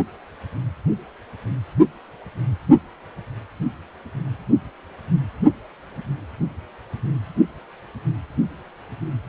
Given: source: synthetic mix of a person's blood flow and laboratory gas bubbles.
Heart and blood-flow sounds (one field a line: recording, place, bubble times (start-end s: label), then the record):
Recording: Doppler ultrasound of blood flow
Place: precordium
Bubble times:
no bubbles
From the record:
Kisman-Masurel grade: 000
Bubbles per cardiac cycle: 0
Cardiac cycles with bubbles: 0%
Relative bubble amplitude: no bubbles discernible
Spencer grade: 0 (complete lack of bubble signals)